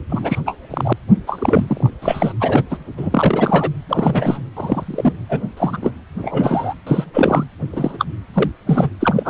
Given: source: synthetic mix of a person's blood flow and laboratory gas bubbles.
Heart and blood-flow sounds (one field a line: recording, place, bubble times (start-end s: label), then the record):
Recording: Doppler ultrasound of blood flow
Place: precordium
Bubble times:
0.09-0.38 s: bubbles
0.46-0.56 s: bubbles
0.70-0.93 s: bubbles
1.27-1.90 s: bubbles
2.02-2.33 s: bubbles
2.40-2.63 s: bubbles
2.70-2.77 s: bubbles
2.97-3.71 s: bubbles
3.89-4.43 s: bubbles
4.57-5.13 s: bubbles
5.29-5.42 s: bubbles
5.57-5.78 s: bubbles
5.82-5.91 s: bubbles
6.21-6.74 s: bubbles
6.87-7.04 s: bubbles
7.14-7.44 s: bubbles
7.72-8.05 s: bubbles
8.34-8.52 s: bubbles
8.67-8.88 s: bubbles
9.00-9.29 s: bubbles
From the record:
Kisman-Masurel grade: 243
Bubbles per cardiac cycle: several, 3 to 8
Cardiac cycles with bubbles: 100%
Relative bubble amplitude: loud (0.450 to 0.775)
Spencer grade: 3 (all of the cardiac periods contain showers or single bubble signals, but not dominating or overriding the cardiac motion signals)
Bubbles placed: anywhere in the cardiac cycle